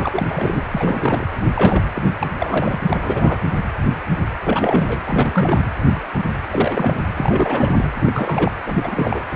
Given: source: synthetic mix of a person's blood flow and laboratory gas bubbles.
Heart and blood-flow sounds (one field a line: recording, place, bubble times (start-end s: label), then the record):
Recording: Doppler ultrasound of blood flow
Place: precordium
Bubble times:
0.00-0.08 s: bubbles
0.12-0.64 s: bubbles
0.71-1.27 s: bubbles
1.55-1.84 s: bubbles
1.95-2.14 s: bubbles
2.20-2.27 s: bubbles
2.41-2.79 s: bubbles
2.88-3.39 s: bubbles
4.44-4.99 s: bubbles
5.07-5.58 s: bubbles
6.50-6.99 s: bubbles
7.16-7.90 s: bubbles
8.04-8.52 s: bubbles
8.66-9.23 s: bubbles
9.30-9.36 s: bubbles
From the record:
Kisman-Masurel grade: 332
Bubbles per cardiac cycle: rolling drumbeat, 9 or more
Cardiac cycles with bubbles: 50 to 99%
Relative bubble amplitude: moderate (0.250 to 0.450)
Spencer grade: 3 (all of the cardiac periods contain showers or single bubble signals, but not dominating or overriding the cardiac motion signals)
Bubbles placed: anywhere in the cardiac cycle